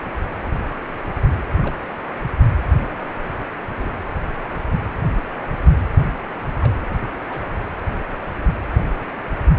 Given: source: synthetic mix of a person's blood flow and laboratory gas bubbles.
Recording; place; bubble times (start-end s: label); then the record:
Doppler ultrasound of blood flow; precordium
1.62-1.77 s: bubbles
3.80-3.94 s: bubbles
6.61-6.73 s: bubbles
6.89-6.96 s: bubbles
7.27-7.41 s: bubbles
From the record:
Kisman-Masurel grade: 121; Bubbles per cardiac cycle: 1 to 2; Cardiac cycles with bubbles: 10 to 50%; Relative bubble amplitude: barely perceptible (0.100 to 0.250); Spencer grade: 2 (many but less than half of the cardiac periods contain bubble signals, singularly or in groups); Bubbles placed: anywhere in the cardiac cycle